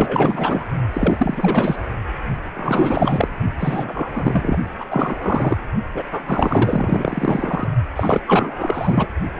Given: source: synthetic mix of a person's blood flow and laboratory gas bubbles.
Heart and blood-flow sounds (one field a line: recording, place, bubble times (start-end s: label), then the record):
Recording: Doppler ultrasound of blood flow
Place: precordium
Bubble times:
0.00-0.66 s: bubbles
0.93-1.76 s: bubbles
2.54-3.29 s: bubbles
3.58-4.58 s: bubbles
4.79-4.85 s: bubbles
4.90-5.58 s: bubbles
5.94-6.03 s: bubbles
6.12-7.68 s: bubbles
7.96-8.21 s: bubbles
8.27-9.06 s: bubbles
9.37-9.40 s: bubbles
From the record:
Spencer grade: 4 (maximum detectable bubble signal sounding continuously throughout systole and diastole of every cardiac period, and overriding the amplitude of the normal cardiac signals)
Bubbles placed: only in the low amplitude regions of the cardiac cycle